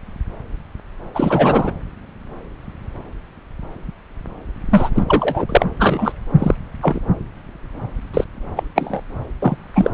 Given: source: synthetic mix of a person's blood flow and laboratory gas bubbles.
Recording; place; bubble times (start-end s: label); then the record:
Doppler ultrasound of blood flow; subclavian vein
1.15-1.71 s: bubbles
4.71-4.89 s: bubbles
4.95-5.04 s: bubbles
5.08-5.45 s: bubbles
5.49-5.64 s: bubbles
5.79-6.12 s: bubbles
6.38-6.55 s: bubbles
6.82-7.00 s: bubbles
8.14-8.25 s: bubbles
8.56-8.64 s: bubbles
8.75-9.02 s: bubbles
9.42-9.70 s: bubbles
9.74-9.91 s: bubbles
From the record:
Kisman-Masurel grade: 223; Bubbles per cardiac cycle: several, 3 to 8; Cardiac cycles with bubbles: 10 to 50%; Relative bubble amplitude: loud (0.450 to 0.775); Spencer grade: 2 (many but less than half of the cardiac periods contain bubble signals, singularly or in groups); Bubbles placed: anywhere in the cardiac cycle